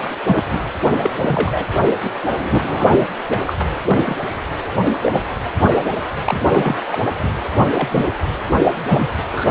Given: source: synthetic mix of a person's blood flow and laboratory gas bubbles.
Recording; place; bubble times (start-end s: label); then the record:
Doppler ultrasound of blood flow; precordium
0.23-0.44 s: bubbles
0.51-0.60 s: bubbles
0.99-1.10 s: bubbles
1.17-1.66 s: bubbles
2.03-2.10 s: bubbles
2.40-3.07 s: bubbles
3.31-3.41 s: bubbles
3.46-3.54 s: bubbles
3.85-4.16 s: bubbles
4.93-4.97 s: bubbles
5.02-5.21 s: bubbles
6.25-6.77 s: bubbles
6.92-7.00 s: bubbles
7.22-7.28 s: bubbles
7.59-7.68 s: bubbles
7.74-8.05 s: bubbles
8.89-9.07 s: bubbles
9.32-9.47 s: bubbles
From the record:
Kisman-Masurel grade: 242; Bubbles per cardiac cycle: several, 3 to 8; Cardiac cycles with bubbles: 100%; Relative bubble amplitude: moderate (0.250 to 0.450); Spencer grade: 3 (all of the cardiac periods contain showers or single bubble signals, but not dominating or overriding the cardiac motion signals); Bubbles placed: anywhere in the cardiac cycle